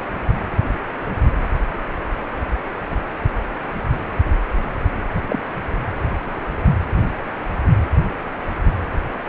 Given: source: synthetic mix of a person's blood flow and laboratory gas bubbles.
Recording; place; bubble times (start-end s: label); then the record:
Doppler ultrasound of blood flow; precordium
5.28-5.39 s: bubbles
From the record:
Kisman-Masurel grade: 112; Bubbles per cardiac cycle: 1 to 2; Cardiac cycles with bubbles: 1 to 10%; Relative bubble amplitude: moderate (0.250 to 0.450); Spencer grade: 1 (occasional bubble signal discernible with the cardiac motion signal, with majority of cardiac periods free of bubbles); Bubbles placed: anywhere in the cardiac cycle